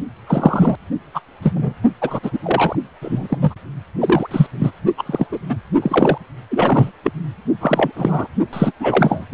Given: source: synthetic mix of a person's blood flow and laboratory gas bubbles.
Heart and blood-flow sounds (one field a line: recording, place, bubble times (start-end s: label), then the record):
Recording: Doppler ultrasound of blood flow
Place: precordium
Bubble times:
0.27-0.75 s: bubbles
1.14-1.21 s: bubbles
1.42-1.74 s: bubbles
2.01-2.20 s: bubbles
2.22-2.39 s: bubbles
2.43-2.76 s: bubbles
3.01-3.38 s: bubbles
3.42-3.54 s: bubbles
4.00-4.27 s: bubbles
4.30-4.46 s: bubbles
4.58-4.72 s: bubbles
4.97-5.04 s: bubbles
5.06-5.27 s: bubbles
5.31-5.39 s: bubbles
5.48-5.56 s: bubbles
5.81-6.18 s: bubbles
6.50-6.92 s: bubbles
7.03-7.12 s: bubbles
7.60-7.92 s: bubbles
7.95-8.28 s: bubbles
8.53-8.72 s: bubbles
8.79-9.26 s: bubbles
From the record:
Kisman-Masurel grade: 243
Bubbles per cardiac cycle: several, 3 to 8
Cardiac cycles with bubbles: 100%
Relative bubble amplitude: loud (0.450 to 0.775)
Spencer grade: 3 (all of the cardiac periods contain showers or single bubble signals, but not dominating or overriding the cardiac motion signals)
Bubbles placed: only in the low amplitude regions of the cardiac cycle